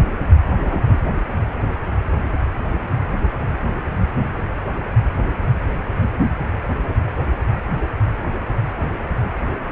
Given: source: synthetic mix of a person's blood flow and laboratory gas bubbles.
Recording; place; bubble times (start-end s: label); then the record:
Doppler ultrasound of blood flow; precordium
0.59-0.98 s: bubbles
From the record:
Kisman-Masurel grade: 112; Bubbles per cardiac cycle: 1 to 2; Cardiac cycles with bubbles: 1 to 10%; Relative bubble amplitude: moderate (0.250 to 0.450); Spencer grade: 1 (occasional bubble signal discernible with the cardiac motion signal, with majority of cardiac periods free of bubbles); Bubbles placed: anywhere in the cardiac cycle